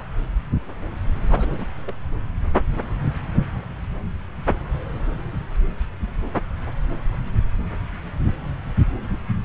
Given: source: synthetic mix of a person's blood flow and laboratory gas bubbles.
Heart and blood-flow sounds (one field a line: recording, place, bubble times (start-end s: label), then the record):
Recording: Doppler ultrasound of blood flow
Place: subclavian vein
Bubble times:
1.27-1.65 s: bubbles
1.79-1.92 s: bubbles
From the record:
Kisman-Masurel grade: 211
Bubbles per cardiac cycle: several, 3 to 8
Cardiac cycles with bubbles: 1 to 10%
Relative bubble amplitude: barely perceptible (0.100 to 0.250)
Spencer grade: 1 (occasional bubble signal discernible with the cardiac motion signal, with majority of cardiac periods free of bubbles)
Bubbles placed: anywhere in the cardiac cycle